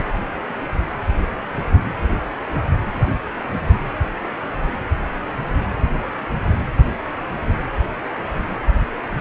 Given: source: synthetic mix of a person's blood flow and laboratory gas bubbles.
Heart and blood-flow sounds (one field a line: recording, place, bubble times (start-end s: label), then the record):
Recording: Doppler ultrasound of blood flow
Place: precordium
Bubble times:
0.00-0.06 s: bubbles
From the record:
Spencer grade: 1 (occasional bubble signal discernible with the cardiac motion signal, with majority of cardiac periods free of bubbles)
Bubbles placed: anywhere in the cardiac cycle